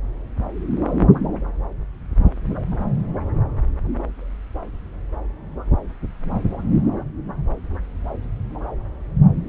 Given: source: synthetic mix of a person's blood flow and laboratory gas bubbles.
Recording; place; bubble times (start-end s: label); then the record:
Doppler ultrasound of blood flow; subclavian vein
no bubbles
From the record:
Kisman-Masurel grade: 000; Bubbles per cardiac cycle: 0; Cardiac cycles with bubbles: 0%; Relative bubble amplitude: no bubbles discernible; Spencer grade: 0 (complete lack of bubble signals)